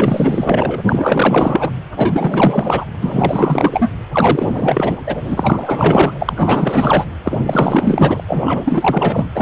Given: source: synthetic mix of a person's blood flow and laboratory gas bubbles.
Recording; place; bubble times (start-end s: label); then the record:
Doppler ultrasound of blood flow; precordium
0.00-1.71 s: bubbles
1.96-2.84 s: bubbles
3.01-3.90 s: bubbles
4.13-5.00 s: bubbles
5.07-6.12 s: bubbles
6.20-7.04 s: bubbles
7.24-8.23 s: bubbles
8.28-9.26 s: bubbles
9.35-9.42 s: bubbles
From the record:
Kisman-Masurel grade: 444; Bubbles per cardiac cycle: continuous sound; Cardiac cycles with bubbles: 100%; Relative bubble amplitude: maximal (0.775 to 0.999); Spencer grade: 4 (maximum detectable bubble signal sounding continuously throughout systole and diastole of every cardiac period, and overriding the amplitude of the normal cardiac signals); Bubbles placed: anywhere in the cardiac cycle